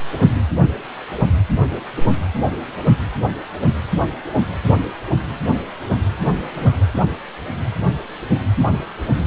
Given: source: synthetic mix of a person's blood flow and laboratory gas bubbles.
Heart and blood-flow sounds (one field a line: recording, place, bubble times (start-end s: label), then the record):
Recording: Doppler ultrasound of blood flow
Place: precordium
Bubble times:
4.77-4.92 s: bubbles
6.38-6.88 s: bubbles
From the record:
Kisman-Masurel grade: 121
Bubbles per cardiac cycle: 1 to 2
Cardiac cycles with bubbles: 10 to 50%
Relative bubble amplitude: barely perceptible (0.100 to 0.250)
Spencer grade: 2 (many but less than half of the cardiac periods contain bubble signals, singularly or in groups)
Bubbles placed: anywhere in the cardiac cycle